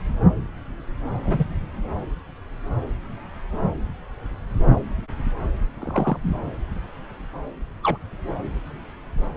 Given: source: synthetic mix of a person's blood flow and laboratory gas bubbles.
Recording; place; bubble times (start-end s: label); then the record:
Doppler ultrasound of blood flow; subclavian vein
1.24-1.45 s: bubbles
5.81-6.52 s: bubbles
7.82-7.97 s: bubbles
From the record:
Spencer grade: 2 (many but less than half of the cardiac periods contain bubble signals, singularly or in groups); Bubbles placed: anywhere in the cardiac cycle